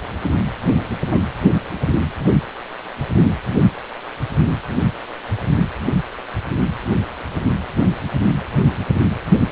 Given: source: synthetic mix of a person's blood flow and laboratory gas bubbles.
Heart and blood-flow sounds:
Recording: Doppler ultrasound of blood flow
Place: precordium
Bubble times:
1.10-1.23 s: bubbles
From the record:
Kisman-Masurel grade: 111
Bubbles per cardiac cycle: 1 to 2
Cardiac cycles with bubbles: 1 to 10%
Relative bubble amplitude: barely perceptible (0.100 to 0.250)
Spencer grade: 1 (occasional bubble signal discernible with the cardiac motion signal, with majority of cardiac periods free of bubbles)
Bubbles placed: anywhere in the cardiac cycle

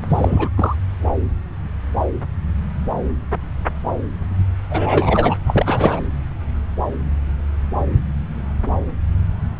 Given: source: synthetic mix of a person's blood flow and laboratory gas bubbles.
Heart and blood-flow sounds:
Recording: Doppler ultrasound of blood flow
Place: subclavian vein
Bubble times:
0.09-0.48 s: bubbles
0.57-0.76 s: bubbles
4.69-5.35 s: bubbles
5.46-6.00 s: bubbles
From the record:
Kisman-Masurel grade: 223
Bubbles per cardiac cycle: several, 3 to 8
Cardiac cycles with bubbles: 10 to 50%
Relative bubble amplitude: loud (0.450 to 0.775)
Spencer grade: 2 (many but less than half of the cardiac periods contain bubble signals, singularly or in groups)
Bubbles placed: anywhere in the cardiac cycle

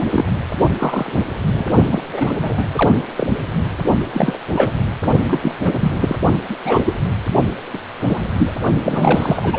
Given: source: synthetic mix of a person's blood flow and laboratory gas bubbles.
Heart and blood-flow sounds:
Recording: Doppler ultrasound of blood flow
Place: precordium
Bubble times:
0.10-0.31 s: bubbles
0.78-1.12 s: bubbles
1.47-1.67 s: bubbles
1.90-2.02 s: bubbles
2.13-2.31 s: bubbles
2.42-2.70 s: bubbles
2.73-2.92 s: bubbles
3.16-3.27 s: bubbles
4.13-4.37 s: bubbles
4.53-4.71 s: bubbles
5.26-5.39 s: bubbles
5.42-5.54 s: bubbles
5.60-6.16 s: bubbles
6.48-6.56 s: bubbles
6.65-6.97 s: bubbles
7.73-7.79 s: bubbles
7.99-8.28 s: bubbles
8.37-8.53 s: bubbles
8.83-9.58 s: bubbles
From the record:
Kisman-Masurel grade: 242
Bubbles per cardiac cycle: several, 3 to 8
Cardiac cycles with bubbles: 100%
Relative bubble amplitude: moderate (0.250 to 0.450)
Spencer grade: 3 (all of the cardiac periods contain showers or single bubble signals, but not dominating or overriding the cardiac motion signals)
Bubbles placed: only in the low amplitude regions of the cardiac cycle

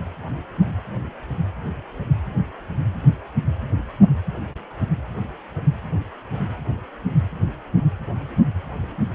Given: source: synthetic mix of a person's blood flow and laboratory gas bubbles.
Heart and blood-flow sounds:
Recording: Doppler ultrasound of blood flow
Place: precordium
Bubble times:
no bubbles
From the record:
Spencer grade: 0 (complete lack of bubble signals)

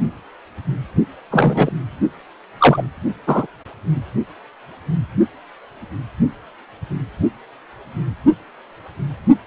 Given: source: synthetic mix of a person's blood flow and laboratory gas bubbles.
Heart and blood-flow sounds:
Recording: Doppler ultrasound of blood flow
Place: precordium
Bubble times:
1.31-1.71 s: bubbles
2.58-2.83 s: bubbles
3.26-3.46 s: bubbles
From the record:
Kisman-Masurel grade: 123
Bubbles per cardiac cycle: 1 to 2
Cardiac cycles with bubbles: 10 to 50%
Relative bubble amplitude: loud (0.450 to 0.775)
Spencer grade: 2 (many but less than half of the cardiac periods contain bubble signals, singularly or in groups)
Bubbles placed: only in the low amplitude regions of the cardiac cycle

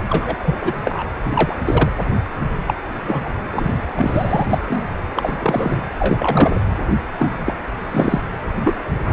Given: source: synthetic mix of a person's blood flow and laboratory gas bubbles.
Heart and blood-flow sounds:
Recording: Doppler ultrasound of blood flow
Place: precordium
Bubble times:
0.08-0.55 s: bubbles
0.61-0.76 s: bubbles
0.84-1.04 s: bubbles
1.25-1.31 s: bubbles
1.34-1.56 s: bubbles
1.65-1.90 s: bubbles
2.67-2.74 s: bubbles
3.07-3.34 s: bubbles
3.50-4.58 s: bubbles
4.68-4.84 s: bubbles
5.16-5.82 s: bubbles
6.00-6.60 s: bubbles
7.18-7.56 s: bubbles
7.91-8.21 s: bubbles
8.63-8.75 s: bubbles
9.03-9.13 s: bubbles
From the record:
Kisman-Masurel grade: 243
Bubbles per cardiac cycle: several, 3 to 8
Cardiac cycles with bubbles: 100%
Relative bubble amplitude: loud (0.450 to 0.775)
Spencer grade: 3 (all of the cardiac periods contain showers or single bubble signals, but not dominating or overriding the cardiac motion signals)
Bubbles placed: anywhere in the cardiac cycle

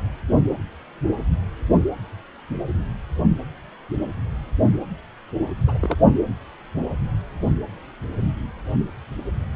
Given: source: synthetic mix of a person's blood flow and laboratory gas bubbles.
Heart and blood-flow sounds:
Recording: Doppler ultrasound of blood flow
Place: precordium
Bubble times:
5.67-5.79 s: bubbles
5.81-5.96 s: bubbles
From the record:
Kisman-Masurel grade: 111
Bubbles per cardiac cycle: 1 to 2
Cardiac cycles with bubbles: 1 to 10%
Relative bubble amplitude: barely perceptible (0.100 to 0.250)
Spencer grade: 1 (occasional bubble signal discernible with the cardiac motion signal, with majority of cardiac periods free of bubbles)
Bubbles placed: anywhere in the cardiac cycle

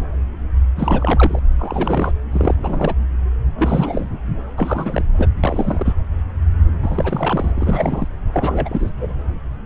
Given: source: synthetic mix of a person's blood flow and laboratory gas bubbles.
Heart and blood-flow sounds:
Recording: Doppler ultrasound of blood flow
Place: subclavian vein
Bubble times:
0.76-1.39 s: bubbles
1.58-2.12 s: bubbles
2.31-2.55 s: bubbles
2.62-2.95 s: bubbles
3.58-4.09 s: bubbles
4.57-5.05 s: bubbles
5.17-5.28 s: bubbles
5.43-5.93 s: bubbles
6.82-7.53 s: bubbles
7.57-8.08 s: bubbles
8.33-8.92 s: bubbles
8.97-9.16 s: bubbles
From the record:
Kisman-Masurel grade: 332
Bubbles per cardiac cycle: rolling drumbeat, 9 or more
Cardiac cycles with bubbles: 50 to 99%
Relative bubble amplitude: moderate (0.250 to 0.450)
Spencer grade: 3 (all of the cardiac periods contain showers or single bubble signals, but not dominating or overriding the cardiac motion signals)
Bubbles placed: anywhere in the cardiac cycle

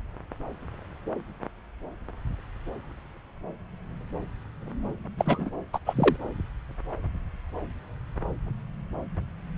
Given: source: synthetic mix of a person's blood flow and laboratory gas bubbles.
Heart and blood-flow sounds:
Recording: Doppler ultrasound of blood flow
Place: subclavian vein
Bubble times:
5.18-5.50 s: bubbles
5.73-5.79 s: bubbles
5.86-6.17 s: bubbles
From the record:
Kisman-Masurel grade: 222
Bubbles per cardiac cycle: several, 3 to 8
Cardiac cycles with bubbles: 10 to 50%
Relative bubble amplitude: moderate (0.250 to 0.450)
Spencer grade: 2 (many but less than half of the cardiac periods contain bubble signals, singularly or in groups)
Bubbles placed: anywhere in the cardiac cycle

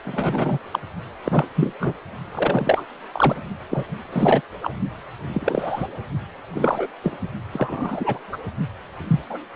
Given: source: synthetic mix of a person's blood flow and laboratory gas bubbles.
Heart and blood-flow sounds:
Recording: Doppler ultrasound of blood flow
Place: precordium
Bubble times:
0.04-0.58 s: bubbles
0.71-0.79 s: bubbles
1.24-1.48 s: bubbles
1.56-1.74 s: bubbles
1.80-1.93 s: bubbles
2.34-2.84 s: bubbles
3.12-3.36 s: bubbles
3.70-3.85 s: bubbles
4.12-4.41 s: bubbles
4.62-4.70 s: bubbles
5.34-5.87 s: bubbles
6.54-6.87 s: bubbles
7.04-7.17 s: bubbles
7.53-8.18 s: bubbles
8.32-8.37 s: bubbles
9.07-9.20 s: bubbles
9.29-9.38 s: bubbles
From the record:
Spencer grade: 3 (all of the cardiac periods contain showers or single bubble signals, but not dominating or overriding the cardiac motion signals)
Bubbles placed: only in the low amplitude regions of the cardiac cycle

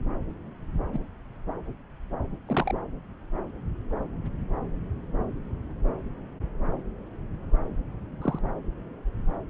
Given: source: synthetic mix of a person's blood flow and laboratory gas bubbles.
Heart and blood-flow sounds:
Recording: Doppler ultrasound of blood flow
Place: subclavian vein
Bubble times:
0.92-0.98 s: bubbles
2.46-2.75 s: bubbles
8.21-8.39 s: bubbles
From the record:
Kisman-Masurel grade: 122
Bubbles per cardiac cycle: 1 to 2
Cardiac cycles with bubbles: 10 to 50%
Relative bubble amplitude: moderate (0.250 to 0.450)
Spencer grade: 2 (many but less than half of the cardiac periods contain bubble signals, singularly or in groups)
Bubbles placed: anywhere in the cardiac cycle

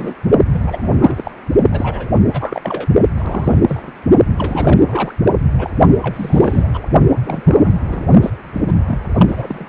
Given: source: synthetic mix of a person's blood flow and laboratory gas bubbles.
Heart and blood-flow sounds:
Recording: Doppler ultrasound of blood flow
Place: precordium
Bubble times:
0.00-0.14 s: bubbles
0.53-0.91 s: bubbles
0.99-1.31 s: bubbles
1.71-2.09 s: bubbles
2.33-2.87 s: bubbles
3.17-3.59 s: bubbles
3.67-3.91 s: bubbles
4.38-5.14 s: bubbles
5.24-5.31 s: bubbles
5.58-5.70 s: bubbles
6.02-6.68 s: bubbles
6.74-6.81 s: bubbles
7.17-7.42 s: bubbles
7.46-7.80 s: bubbles
7.84-8.06 s: bubbles
8.22-8.30 s: bubbles
8.52-8.61 s: bubbles
8.67-8.72 s: bubbles
8.88-8.99 s: bubbles
9.15-9.66 s: bubbles
From the record:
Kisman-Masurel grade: 342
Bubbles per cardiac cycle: rolling drumbeat, 9 or more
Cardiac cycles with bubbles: 100%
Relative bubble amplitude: moderate (0.250 to 0.450)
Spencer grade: 3 (all of the cardiac periods contain showers or single bubble signals, but not dominating or overriding the cardiac motion signals)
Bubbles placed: only in the low amplitude regions of the cardiac cycle

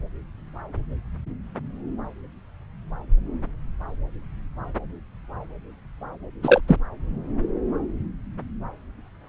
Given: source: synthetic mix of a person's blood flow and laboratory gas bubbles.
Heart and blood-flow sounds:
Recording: Doppler ultrasound of blood flow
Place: subclavian vein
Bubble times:
6.43-6.61 s: bubbles
6.67-6.76 s: bubbles
From the record:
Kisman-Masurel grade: 223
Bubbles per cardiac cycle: several, 3 to 8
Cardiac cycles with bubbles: 10 to 50%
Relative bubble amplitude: loud (0.450 to 0.775)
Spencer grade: 2 (many but less than half of the cardiac periods contain bubble signals, singularly or in groups)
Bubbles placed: anywhere in the cardiac cycle

